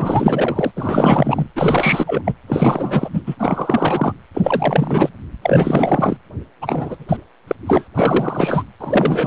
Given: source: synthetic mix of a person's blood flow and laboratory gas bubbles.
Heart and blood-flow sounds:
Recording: Doppler ultrasound of blood flow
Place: precordium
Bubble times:
0.00-0.72 s: bubbles
0.76-1.48 s: bubbles
1.56-2.22 s: bubbles
2.25-2.34 s: bubbles
2.47-3.10 s: bubbles
3.12-3.21 s: bubbles
3.26-3.35 s: bubbles
3.39-4.12 s: bubbles
4.34-5.09 s: bubbles
5.41-6.17 s: bubbles
6.61-7.05 s: bubbles
7.09-7.17 s: bubbles
7.47-7.55 s: bubbles
7.66-7.88 s: bubbles
7.94-8.65 s: bubbles
8.80-9.27 s: bubbles
From the record:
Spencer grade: 4 (maximum detectable bubble signal sounding continuously throughout systole and diastole of every cardiac period, and overriding the amplitude of the normal cardiac signals)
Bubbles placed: anywhere in the cardiac cycle

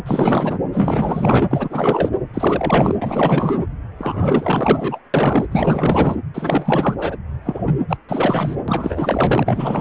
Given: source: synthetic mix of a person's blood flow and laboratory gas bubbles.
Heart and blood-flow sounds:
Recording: Doppler ultrasound of blood flow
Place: precordium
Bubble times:
0.06-0.58 s: bubbles
0.72-1.49 s: bubbles
1.51-2.09 s: bubbles
2.33-2.96 s: bubbles
3.02-3.65 s: bubbles
3.98-5.00 s: bubbles
5.13-5.46 s: bubbles
5.51-6.16 s: bubbles
6.34-6.95 s: bubbles
6.98-7.17 s: bubbles
7.44-7.79 s: bubbles
7.89-7.97 s: bubbles
8.09-8.55 s: bubbles
8.68-9.81 s: bubbles
From the record:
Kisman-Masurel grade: 444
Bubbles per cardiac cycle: continuous sound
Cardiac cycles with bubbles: 100%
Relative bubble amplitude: maximal (0.775 to 0.999)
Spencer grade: 4 (maximum detectable bubble signal sounding continuously throughout systole and diastole of every cardiac period, and overriding the amplitude of the normal cardiac signals)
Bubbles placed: anywhere in the cardiac cycle

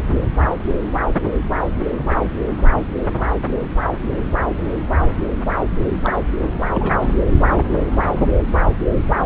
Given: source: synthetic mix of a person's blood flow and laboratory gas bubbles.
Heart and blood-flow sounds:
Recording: Doppler ultrasound of blood flow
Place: subclavian vein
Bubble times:
6.04-6.17 s: bubbles
6.74-7.13 s: bubbles
7.56-7.64 s: bubbles
From the record:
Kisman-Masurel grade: 212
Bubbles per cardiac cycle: several, 3 to 8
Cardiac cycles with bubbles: 1 to 10%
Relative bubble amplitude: moderate (0.250 to 0.450)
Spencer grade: 1 (occasional bubble signal discernible with the cardiac motion signal, with majority of cardiac periods free of bubbles)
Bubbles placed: anywhere in the cardiac cycle

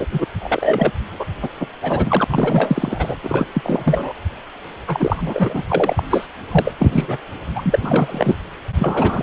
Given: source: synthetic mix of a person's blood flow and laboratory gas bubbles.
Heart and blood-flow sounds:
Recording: Doppler ultrasound of blood flow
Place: precordium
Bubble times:
0.00-0.07 s: bubbles
0.10-0.26 s: bubbles
0.41-0.92 s: bubbles
1.19-1.25 s: bubbles
1.42-1.49 s: bubbles
1.59-1.67 s: bubbles
1.82-2.25 s: bubbles
2.30-3.16 s: bubbles
3.23-3.46 s: bubbles
3.53-4.12 s: bubbles
4.86-5.62 s: bubbles
5.68-6.03 s: bubbles
6.09-6.26 s: bubbles
6.51-6.75 s: bubbles
6.79-7.17 s: bubbles
7.55-8.35 s: bubbles
8.79-9.22 s: bubbles
From the record:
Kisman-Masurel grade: 343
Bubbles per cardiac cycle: rolling drumbeat, 9 or more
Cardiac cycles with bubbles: 100%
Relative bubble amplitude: loud (0.450 to 0.775)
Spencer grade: 3 (all of the cardiac periods contain showers or single bubble signals, but not dominating or overriding the cardiac motion signals)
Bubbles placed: anywhere in the cardiac cycle

